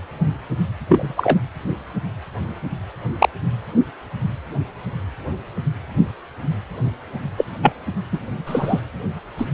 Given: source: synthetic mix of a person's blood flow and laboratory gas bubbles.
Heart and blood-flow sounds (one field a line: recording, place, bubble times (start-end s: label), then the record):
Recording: Doppler ultrasound of blood flow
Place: precordium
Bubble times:
0.88-1.14 s: bubbles
1.17-1.39 s: bubbles
3.19-3.29 s: bubbles
7.37-7.45 s: bubbles
7.62-7.73 s: bubbles
8.12-8.20 s: bubbles
8.46-8.81 s: bubbles
9.38-9.46 s: bubbles
From the record:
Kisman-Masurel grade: 123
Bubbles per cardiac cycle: 1 to 2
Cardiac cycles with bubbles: 10 to 50%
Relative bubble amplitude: loud (0.450 to 0.775)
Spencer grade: 2 (many but less than half of the cardiac periods contain bubble signals, singularly or in groups)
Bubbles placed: anywhere in the cardiac cycle